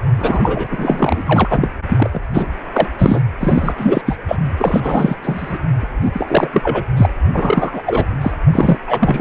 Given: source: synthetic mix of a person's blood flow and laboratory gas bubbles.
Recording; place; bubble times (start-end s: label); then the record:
Doppler ultrasound of blood flow; precordium
0.17-0.67 s: bubbles
0.71-1.22 s: bubbles
1.26-1.68 s: bubbles
1.88-2.10 s: bubbles
2.13-2.21 s: bubbles
2.33-2.47 s: bubbles
2.72-2.88 s: bubbles
2.99-3.22 s: bubbles
3.40-3.75 s: bubbles
3.77-4.02 s: bubbles
4.06-4.16 s: bubbles
4.28-4.37 s: bubbles
4.57-5.15 s: bubbles
5.23-5.58 s: bubbles
5.79-6.48 s: bubbles
6.53-6.86 s: bubbles
6.96-7.10 s: bubbles
7.33-7.82 s: bubbles
7.86-8.06 s: bubbles
8.21-8.31 s: bubbles
8.48-8.78 s: bubbles
8.87-9.21 s: bubbles
From the record:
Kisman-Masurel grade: 343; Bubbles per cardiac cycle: rolling drumbeat, 9 or more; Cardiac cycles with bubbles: 100%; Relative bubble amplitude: loud (0.450 to 0.775); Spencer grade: 3 (all of the cardiac periods contain showers or single bubble signals, but not dominating or overriding the cardiac motion signals); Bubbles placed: anywhere in the cardiac cycle